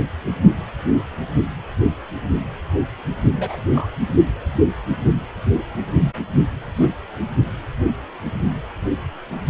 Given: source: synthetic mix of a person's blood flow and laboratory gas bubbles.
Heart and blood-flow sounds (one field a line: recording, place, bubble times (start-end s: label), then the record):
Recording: Doppler ultrasound of blood flow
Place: precordium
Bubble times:
3.37-3.58 s: bubbles
3.73-3.89 s: bubbles
6.76-6.91 s: bubbles
From the record:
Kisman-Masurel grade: 122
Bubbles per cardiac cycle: 1 to 2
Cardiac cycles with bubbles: 10 to 50%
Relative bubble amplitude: moderate (0.250 to 0.450)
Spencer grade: 2 (many but less than half of the cardiac periods contain bubble signals, singularly or in groups)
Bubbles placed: only in the low amplitude regions of the cardiac cycle